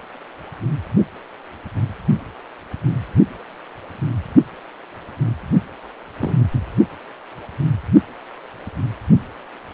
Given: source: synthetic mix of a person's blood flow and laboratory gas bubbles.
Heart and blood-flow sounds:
Doppler ultrasound of blood flow; precordium
6.18-6.34 s: bubbles
From the record:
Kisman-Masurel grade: 121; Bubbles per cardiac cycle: 1 to 2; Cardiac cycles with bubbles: 10 to 50%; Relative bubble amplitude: barely perceptible (0.100 to 0.250); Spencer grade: 2 (many but less than half of the cardiac periods contain bubble signals, singularly or in groups); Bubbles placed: only in the low amplitude regions of the cardiac cycle

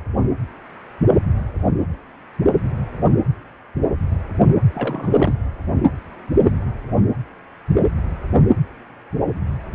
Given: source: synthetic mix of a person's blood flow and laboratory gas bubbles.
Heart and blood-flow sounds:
Doppler ultrasound of blood flow; precordium
4.75-5.34 s: bubbles
From the record:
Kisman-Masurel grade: 211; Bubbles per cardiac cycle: several, 3 to 8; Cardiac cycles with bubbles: 1 to 10%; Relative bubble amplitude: barely perceptible (0.100 to 0.250); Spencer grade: 1 (occasional bubble signal discernible with the cardiac motion signal, with majority of cardiac periods free of bubbles); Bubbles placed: anywhere in the cardiac cycle

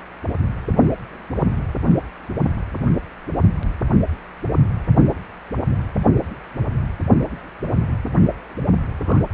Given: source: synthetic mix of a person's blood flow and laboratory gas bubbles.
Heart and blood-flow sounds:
Doppler ultrasound of blood flow; precordium
9.04-9.21 s: bubbles
From the record:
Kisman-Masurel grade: 112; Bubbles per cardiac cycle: 1 to 2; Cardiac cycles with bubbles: 1 to 10%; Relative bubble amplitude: moderate (0.250 to 0.450); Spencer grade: 1 (occasional bubble signal discernible with the cardiac motion signal, with majority of cardiac periods free of bubbles); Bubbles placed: anywhere in the cardiac cycle

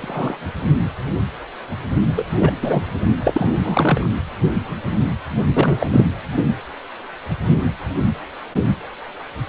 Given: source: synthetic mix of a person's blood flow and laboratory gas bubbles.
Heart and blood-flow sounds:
Doppler ultrasound of blood flow; precordium
0.00-0.38 s: bubbles
2.16-2.25 s: bubbles
2.30-2.53 s: bubbles
2.62-2.84 s: bubbles
3.24-3.57 s: bubbles
3.64-4.13 s: bubbles
5.53-6.06 s: bubbles
From the record:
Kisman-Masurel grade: 223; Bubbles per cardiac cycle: several, 3 to 8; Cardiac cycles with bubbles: 10 to 50%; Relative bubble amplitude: loud (0.450 to 0.775); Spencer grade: 2 (many but less than half of the cardiac periods contain bubble signals, singularly or in groups); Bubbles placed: only in the low amplitude regions of the cardiac cycle

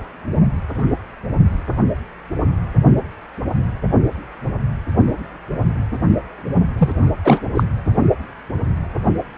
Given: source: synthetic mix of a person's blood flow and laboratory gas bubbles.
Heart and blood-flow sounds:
Doppler ultrasound of blood flow; precordium
6.78-6.92 s: bubbles
7.25-7.42 s: bubbles
7.54-7.63 s: bubbles
From the record:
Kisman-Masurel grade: 213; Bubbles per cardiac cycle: several, 3 to 8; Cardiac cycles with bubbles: 1 to 10%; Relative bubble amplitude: loud (0.450 to 0.775); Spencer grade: 1 (occasional bubble signal discernible with the cardiac motion signal, with majority of cardiac periods free of bubbles); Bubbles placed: only in the low amplitude regions of the cardiac cycle

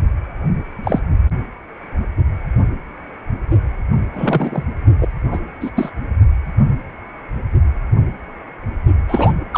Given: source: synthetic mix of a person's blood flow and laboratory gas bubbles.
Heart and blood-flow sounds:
Doppler ultrasound of blood flow; precordium
0.83-0.99 s: bubbles
4.13-4.64 s: bubbles
5.01-5.08 s: bubbles
5.31-5.40 s: bubbles
5.60-5.70 s: bubbles
5.76-5.93 s: bubbles
9.08-9.33 s: bubbles
9.53-9.58 s: bubbles
From the record:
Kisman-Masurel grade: 223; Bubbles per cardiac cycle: several, 3 to 8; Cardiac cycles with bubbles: 10 to 50%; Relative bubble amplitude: loud (0.450 to 0.775); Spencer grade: 2 (many but less than half of the cardiac periods contain bubble signals, singularly or in groups); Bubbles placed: only in the low amplitude regions of the cardiac cycle

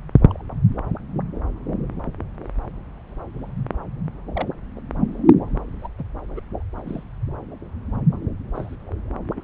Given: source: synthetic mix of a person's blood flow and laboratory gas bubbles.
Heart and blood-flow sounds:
Doppler ultrasound of blood flow; subclavian vein
0.29-0.42 s: bubbles
4.35-4.48 s: bubbles
4.76-4.79 s: bubbles
5.79-5.88 s: bubbles
5.98-6.03 s: bubbles
6.35-6.40 s: bubbles
6.77-7.03 s: bubbles
8.54-8.76 s: bubbles
9.36-9.43 s: bubbles
From the record:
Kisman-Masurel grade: 121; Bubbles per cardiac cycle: 1 to 2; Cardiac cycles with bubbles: 10 to 50%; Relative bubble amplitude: barely perceptible (0.100 to 0.250); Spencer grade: 2 (many but less than half of the cardiac periods contain bubble signals, singularly or in groups); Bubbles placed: anywhere in the cardiac cycle

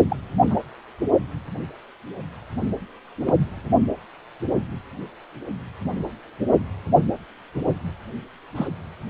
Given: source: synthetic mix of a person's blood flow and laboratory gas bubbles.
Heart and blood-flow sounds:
Doppler ultrasound of blood flow; precordium
0.09-0.16 s: bubbles
0.47-0.54 s: bubbles
3.26-3.32 s: bubbles
8.55-8.68 s: bubbles
From the record:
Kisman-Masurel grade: 122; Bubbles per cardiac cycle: 1 to 2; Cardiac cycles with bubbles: 10 to 50%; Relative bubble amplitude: moderate (0.250 to 0.450); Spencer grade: 2 (many but less than half of the cardiac periods contain bubble signals, singularly or in groups); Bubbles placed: only in the low amplitude regions of the cardiac cycle

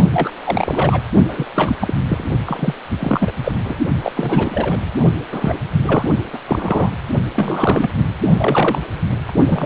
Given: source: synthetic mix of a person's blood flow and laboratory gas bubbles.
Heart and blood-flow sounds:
Doppler ultrasound of blood flow; precordium
0.12-0.30 s: bubbles
0.44-1.02 s: bubbles
1.28-1.46 s: bubbles
1.54-1.75 s: bubbles
1.80-1.94 s: bubbles
2.09-2.24 s: bubbles
2.46-2.74 s: bubbles
3.00-3.31 s: bubbles
3.44-3.52 s: bubbles
3.65-3.77 s: bubbles
4.02-4.12 s: bubbles
4.17-4.80 s: bubbles
5.32-5.58 s: bubbles
5.84-6.09 s: bubbles
6.33-6.39 s: bubbles
6.47-6.90 s: bubbles
7.31-7.90 s: bubbles
8.38-8.79 s: bubbles
9.28-9.33 s: bubbles
9.46-9.65 s: bubbles
From the record:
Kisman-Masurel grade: 342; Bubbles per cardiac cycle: rolling drumbeat, 9 or more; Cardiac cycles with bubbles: 100%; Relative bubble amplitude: moderate (0.250 to 0.450); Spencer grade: 3 (all of the cardiac periods contain showers or single bubble signals, but not dominating or overriding the cardiac motion signals); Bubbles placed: only in the low amplitude regions of the cardiac cycle

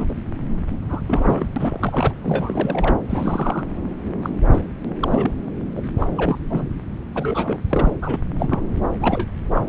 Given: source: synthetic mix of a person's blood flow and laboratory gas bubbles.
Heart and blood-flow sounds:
Doppler ultrasound of blood flow; subclavian vein
0.00-0.14 s: bubbles
0.88-1.01 s: bubbles
1.07-1.46 s: bubbles
1.56-2.16 s: bubbles
2.22-2.95 s: bubbles
3.10-3.66 s: bubbles
4.22-4.30 s: bubbles
4.50-4.62 s: bubbles
5.00-5.31 s: bubbles
5.76-5.81 s: bubbles
6.00-6.09 s: bubbles
6.17-6.38 s: bubbles
6.49-6.67 s: bubbles
7.13-7.58 s: bubbles
7.69-7.92 s: bubbles
8.02-8.19 s: bubbles
8.38-8.62 s: bubbles
9.01-9.28 s: bubbles
9.54-9.62 s: bubbles
From the record:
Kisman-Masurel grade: 242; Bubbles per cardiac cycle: several, 3 to 8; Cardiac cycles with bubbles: 100%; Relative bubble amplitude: moderate (0.250 to 0.450); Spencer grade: 3 (all of the cardiac periods contain showers or single bubble signals, but not dominating or overriding the cardiac motion signals); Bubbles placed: anywhere in the cardiac cycle

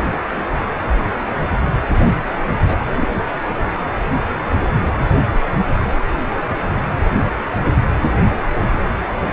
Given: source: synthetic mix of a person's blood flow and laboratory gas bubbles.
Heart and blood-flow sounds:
Doppler ultrasound of blood flow; precordium
2.67-2.78 s: bubbles
2.87-3.16 s: bubbles
From the record:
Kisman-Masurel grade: 212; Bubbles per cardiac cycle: several, 3 to 8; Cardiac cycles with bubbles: 1 to 10%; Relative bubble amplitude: moderate (0.250 to 0.450); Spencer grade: 1 (occasional bubble signal discernible with the cardiac motion signal, with majority of cardiac periods free of bubbles); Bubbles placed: anywhere in the cardiac cycle

